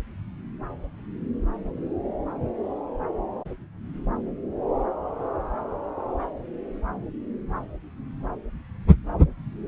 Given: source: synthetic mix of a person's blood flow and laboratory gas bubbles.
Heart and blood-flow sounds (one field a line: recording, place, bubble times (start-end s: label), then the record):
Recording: Doppler ultrasound of blood flow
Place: subclavian vein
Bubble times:
no bubbles
From the record:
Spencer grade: 0 (complete lack of bubble signals)